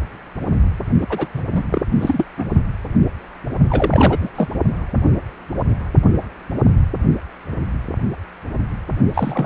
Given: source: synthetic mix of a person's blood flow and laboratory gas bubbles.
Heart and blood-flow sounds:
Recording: Doppler ultrasound of blood flow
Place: precordium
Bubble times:
1.01-1.06 s: bubbles
1.09-1.28 s: bubbles
1.34-1.43 s: bubbles
1.51-1.81 s: bubbles
2.00-2.25 s: bubbles
2.37-2.50 s: bubbles
3.70-4.29 s: bubbles
4.35-4.49 s: bubbles
9.14-9.46 s: bubbles
From the record:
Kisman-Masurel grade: 332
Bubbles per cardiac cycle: rolling drumbeat, 9 or more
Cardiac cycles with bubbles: 50 to 99%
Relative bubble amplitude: moderate (0.250 to 0.450)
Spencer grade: 3 (all of the cardiac periods contain showers or single bubble signals, but not dominating or overriding the cardiac motion signals)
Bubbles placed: only in the low amplitude regions of the cardiac cycle

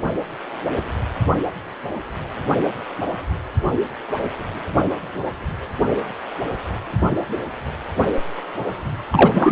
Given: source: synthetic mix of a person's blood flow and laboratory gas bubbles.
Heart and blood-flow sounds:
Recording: Doppler ultrasound of blood flow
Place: precordium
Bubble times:
9.11-9.52 s: bubbles
From the record:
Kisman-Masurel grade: 213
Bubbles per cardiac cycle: several, 3 to 8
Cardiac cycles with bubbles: 1 to 10%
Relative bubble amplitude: loud (0.450 to 0.775)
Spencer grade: 1 (occasional bubble signal discernible with the cardiac motion signal, with majority of cardiac periods free of bubbles)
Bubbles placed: only in the low amplitude regions of the cardiac cycle

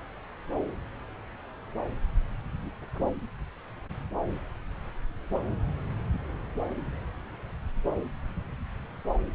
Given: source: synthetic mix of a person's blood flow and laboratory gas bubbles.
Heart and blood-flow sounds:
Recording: Doppler ultrasound of blood flow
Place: subclavian vein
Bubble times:
no bubbles
From the record:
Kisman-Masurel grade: 000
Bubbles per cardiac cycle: 0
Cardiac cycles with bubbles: 0%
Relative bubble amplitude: no bubbles discernible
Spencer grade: 0 (complete lack of bubble signals)

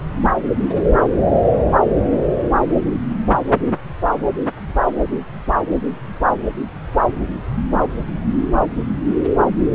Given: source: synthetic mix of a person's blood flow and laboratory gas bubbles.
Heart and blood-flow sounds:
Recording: Doppler ultrasound of blood flow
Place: subclavian vein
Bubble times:
no bubbles
From the record:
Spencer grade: 0 (complete lack of bubble signals)

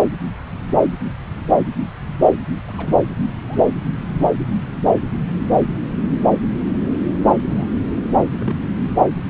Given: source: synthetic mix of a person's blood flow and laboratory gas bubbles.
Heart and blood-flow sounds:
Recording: Doppler ultrasound of blood flow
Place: subclavian vein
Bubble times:
0.68-0.81 s: bubbles
2.67-2.98 s: bubbles
3.27-3.34 s: bubbles
3.47-3.63 s: bubbles
7.43-7.67 s: bubbles
8.39-8.55 s: bubbles
From the record:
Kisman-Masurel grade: 121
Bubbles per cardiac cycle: 1 to 2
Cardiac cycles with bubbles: 10 to 50%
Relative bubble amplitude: barely perceptible (0.100 to 0.250)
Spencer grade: 2 (many but less than half of the cardiac periods contain bubble signals, singularly or in groups)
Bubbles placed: anywhere in the cardiac cycle

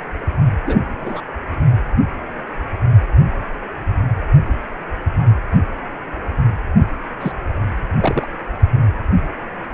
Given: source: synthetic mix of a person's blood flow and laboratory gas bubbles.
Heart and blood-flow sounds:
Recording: Doppler ultrasound of blood flow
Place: precordium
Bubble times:
0.66-0.80 s: bubbles
0.99-1.21 s: bubbles
7.20-7.32 s: bubbles
8.00-8.27 s: bubbles
From the record:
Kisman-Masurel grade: 122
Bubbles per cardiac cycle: 1 to 2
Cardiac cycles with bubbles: 10 to 50%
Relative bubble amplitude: moderate (0.250 to 0.450)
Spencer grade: 2 (many but less than half of the cardiac periods contain bubble signals, singularly or in groups)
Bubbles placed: only in the low amplitude regions of the cardiac cycle

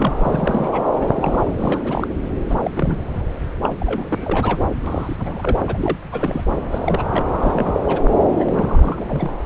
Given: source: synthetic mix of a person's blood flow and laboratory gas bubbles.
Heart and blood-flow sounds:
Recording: Doppler ultrasound of blood flow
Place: subclavian vein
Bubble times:
0.00-0.14 s: bubbles
0.17-0.85 s: bubbles
0.95-2.08 s: bubbles
2.50-2.58 s: bubbles
2.62-2.98 s: bubbles
3.64-3.75 s: bubbles
3.80-4.63 s: bubbles
4.80-5.58 s: bubbles
5.67-6.01 s: bubbles
6.12-6.45 s: bubbles
6.71-7.05 s: bubbles
7.12-7.24 s: bubbles
7.32-8.01 s: bubbles
8.36-9.32 s: bubbles
From the record:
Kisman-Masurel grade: 342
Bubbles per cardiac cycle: rolling drumbeat, 9 or more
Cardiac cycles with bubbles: 100%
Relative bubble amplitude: moderate (0.250 to 0.450)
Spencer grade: 3 (all of the cardiac periods contain showers or single bubble signals, but not dominating or overriding the cardiac motion signals)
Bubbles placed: anywhere in the cardiac cycle

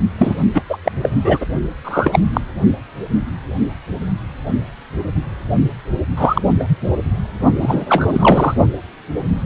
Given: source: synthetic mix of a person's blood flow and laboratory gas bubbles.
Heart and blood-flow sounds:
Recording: Doppler ultrasound of blood flow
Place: precordium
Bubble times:
0.18-0.34 s: bubbles
0.54-0.63 s: bubbles
0.69-0.78 s: bubbles
0.84-0.92 s: bubbles
1.02-1.09 s: bubbles
1.24-1.38 s: bubbles
1.41-1.46 s: bubbles
1.84-2.19 s: bubbles
2.33-2.40 s: bubbles
6.17-6.42 s: bubbles
6.60-6.64 s: bubbles
7.62-7.86 s: bubbles
7.88-8.54 s: bubbles
From the record:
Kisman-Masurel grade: 233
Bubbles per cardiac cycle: several, 3 to 8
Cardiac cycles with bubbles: 50 to 99%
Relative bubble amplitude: loud (0.450 to 0.775)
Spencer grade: 3 (all of the cardiac periods contain showers or single bubble signals, but not dominating or overriding the cardiac motion signals)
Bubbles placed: only in the low amplitude regions of the cardiac cycle

